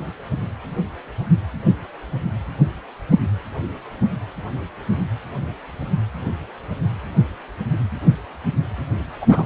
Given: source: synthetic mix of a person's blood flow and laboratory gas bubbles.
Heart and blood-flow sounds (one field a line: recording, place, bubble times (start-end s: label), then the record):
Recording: Doppler ultrasound of blood flow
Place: precordium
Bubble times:
9.21-9.26 s: bubbles
9.31-9.46 s: bubbles
From the record:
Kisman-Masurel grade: 123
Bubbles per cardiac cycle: 1 to 2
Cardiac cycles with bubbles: 10 to 50%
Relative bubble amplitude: loud (0.450 to 0.775)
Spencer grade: 2 (many but less than half of the cardiac periods contain bubble signals, singularly or in groups)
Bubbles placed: anywhere in the cardiac cycle